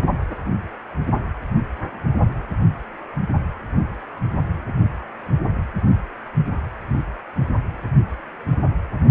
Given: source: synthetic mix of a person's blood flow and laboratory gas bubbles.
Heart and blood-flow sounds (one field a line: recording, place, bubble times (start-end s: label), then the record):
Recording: Doppler ultrasound of blood flow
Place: precordium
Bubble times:
0.00-0.06 s: bubbles
From the record:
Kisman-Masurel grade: 221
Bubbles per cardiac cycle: several, 3 to 8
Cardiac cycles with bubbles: 10 to 50%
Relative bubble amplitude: barely perceptible (0.100 to 0.250)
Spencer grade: 2 (many but less than half of the cardiac periods contain bubble signals, singularly or in groups)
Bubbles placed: anywhere in the cardiac cycle